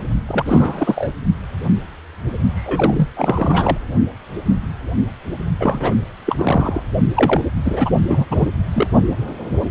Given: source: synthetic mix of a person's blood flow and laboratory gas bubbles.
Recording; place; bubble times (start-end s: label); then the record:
Doppler ultrasound of blood flow; precordium
0.00-0.02 s: bubbles
0.29-1.11 s: bubbles
2.54-3.08 s: bubbles
3.16-3.77 s: bubbles
5.59-5.95 s: bubbles
6.26-6.83 s: bubbles
7.16-7.42 s: bubbles
7.64-7.89 s: bubbles
8.09-8.25 s: bubbles
8.31-8.48 s: bubbles
8.74-8.87 s: bubbles
From the record:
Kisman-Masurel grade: 333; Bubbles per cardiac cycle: rolling drumbeat, 9 or more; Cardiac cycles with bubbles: 50 to 99%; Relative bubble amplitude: loud (0.450 to 0.775); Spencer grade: 3 (all of the cardiac periods contain showers or single bubble signals, but not dominating or overriding the cardiac motion signals); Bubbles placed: only in the low amplitude regions of the cardiac cycle